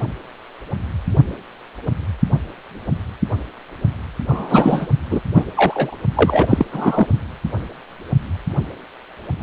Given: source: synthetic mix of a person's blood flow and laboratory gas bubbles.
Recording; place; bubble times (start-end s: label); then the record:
Doppler ultrasound of blood flow; precordium
4.28-4.88 s: bubbles
5.10-5.21 s: bubbles
5.34-5.45 s: bubbles
5.55-5.96 s: bubbles
6.16-6.46 s: bubbles
6.50-6.66 s: bubbles
6.72-7.07 s: bubbles
From the record:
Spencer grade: 2 (many but less than half of the cardiac periods contain bubble signals, singularly or in groups); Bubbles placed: only in the low amplitude regions of the cardiac cycle